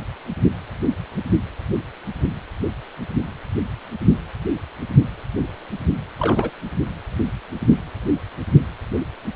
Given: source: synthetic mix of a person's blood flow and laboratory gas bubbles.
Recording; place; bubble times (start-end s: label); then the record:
Doppler ultrasound of blood flow; precordium
6.18-6.50 s: bubbles
From the record:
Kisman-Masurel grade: 212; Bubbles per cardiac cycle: several, 3 to 8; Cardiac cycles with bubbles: 1 to 10%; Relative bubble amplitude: moderate (0.250 to 0.450); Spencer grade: 1 (occasional bubble signal discernible with the cardiac motion signal, with majority of cardiac periods free of bubbles); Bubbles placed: anywhere in the cardiac cycle